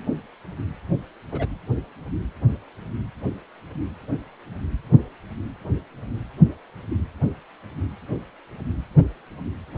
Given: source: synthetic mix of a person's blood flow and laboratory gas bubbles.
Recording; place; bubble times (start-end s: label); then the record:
Doppler ultrasound of blood flow; precordium
1.31-1.46 s: bubbles
From the record:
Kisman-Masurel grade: 111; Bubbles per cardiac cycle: 1 to 2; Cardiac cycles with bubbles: 1 to 10%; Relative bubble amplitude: barely perceptible (0.100 to 0.250); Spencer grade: 1 (occasional bubble signal discernible with the cardiac motion signal, with majority of cardiac periods free of bubbles); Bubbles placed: anywhere in the cardiac cycle